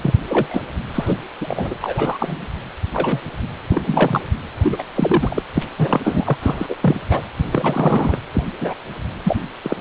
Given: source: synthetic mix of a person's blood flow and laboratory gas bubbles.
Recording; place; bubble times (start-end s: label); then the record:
Doppler ultrasound of blood flow; precordium
0.00-0.14 s: bubbles
0.28-0.62 s: bubbles
0.94-1.16 s: bubbles
1.41-1.74 s: bubbles
1.81-2.46 s: bubbles
2.92-3.23 s: bubbles
3.69-4.24 s: bubbles
4.63-4.83 s: bubbles
4.95-5.43 s: bubbles
5.54-5.66 s: bubbles
5.78-6.38 s: bubbles
6.42-6.75 s: bubbles
6.82-7.00 s: bubbles
7.09-7.21 s: bubbles
7.51-8.18 s: bubbles
8.33-8.43 s: bubbles
8.61-8.74 s: bubbles
9.23-9.44 s: bubbles
9.63-9.77 s: bubbles
From the record:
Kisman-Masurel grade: 243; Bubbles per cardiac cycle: several, 3 to 8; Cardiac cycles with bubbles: 100%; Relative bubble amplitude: loud (0.450 to 0.775); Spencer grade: 3 (all of the cardiac periods contain showers or single bubble signals, but not dominating or overriding the cardiac motion signals); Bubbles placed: anywhere in the cardiac cycle